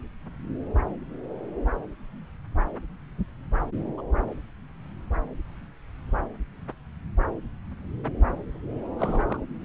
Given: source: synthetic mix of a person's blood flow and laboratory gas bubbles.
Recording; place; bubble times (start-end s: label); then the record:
Doppler ultrasound of blood flow; subclavian vein
3.98-4.01 s: bubbles
8.99-9.43 s: bubbles
From the record:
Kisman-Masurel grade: 121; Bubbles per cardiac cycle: 1 to 2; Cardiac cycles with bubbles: 10 to 50%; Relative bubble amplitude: barely perceptible (0.100 to 0.250); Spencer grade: 2 (many but less than half of the cardiac periods contain bubble signals, singularly or in groups); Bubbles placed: anywhere in the cardiac cycle